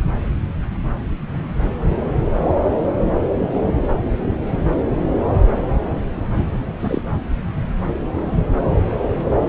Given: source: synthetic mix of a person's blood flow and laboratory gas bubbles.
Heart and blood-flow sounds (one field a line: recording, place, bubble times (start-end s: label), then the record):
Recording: Doppler ultrasound of blood flow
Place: subclavian vein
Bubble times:
6.80-7.01 s: bubbles
From the record:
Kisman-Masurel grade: 112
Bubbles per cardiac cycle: 1 to 2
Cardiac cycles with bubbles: 1 to 10%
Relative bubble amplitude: moderate (0.250 to 0.450)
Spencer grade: 1 (occasional bubble signal discernible with the cardiac motion signal, with majority of cardiac periods free of bubbles)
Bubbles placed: anywhere in the cardiac cycle